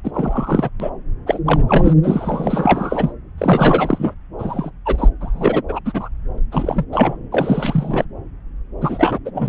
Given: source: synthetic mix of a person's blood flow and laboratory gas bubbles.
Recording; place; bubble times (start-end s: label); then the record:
Doppler ultrasound of blood flow; subclavian vein
0.03-0.11 s: bubbles
0.14-0.69 s: bubbles
0.79-0.90 s: bubbles
1.26-1.40 s: bubbles
1.45-1.60 s: bubbles
1.68-1.94 s: bubbles
2.02-3.12 s: bubbles
3.38-4.14 s: bubbles
4.38-4.71 s: bubbles
4.86-5.08 s: bubbles
5.21-5.62 s: bubbles
5.69-5.80 s: bubbles
5.85-6.08 s: bubbles
6.52-6.85 s: bubbles
6.92-7.17 s: bubbles
7.32-8.04 s: bubbles
8.80-9.18 s: bubbles
9.25-9.31 s: bubbles
9.35-9.49 s: bubbles
From the record:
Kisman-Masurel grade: 343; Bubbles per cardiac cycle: rolling drumbeat, 9 or more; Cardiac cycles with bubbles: 100%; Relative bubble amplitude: loud (0.450 to 0.775); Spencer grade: 3 (all of the cardiac periods contain showers or single bubble signals, but not dominating or overriding the cardiac motion signals); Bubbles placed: anywhere in the cardiac cycle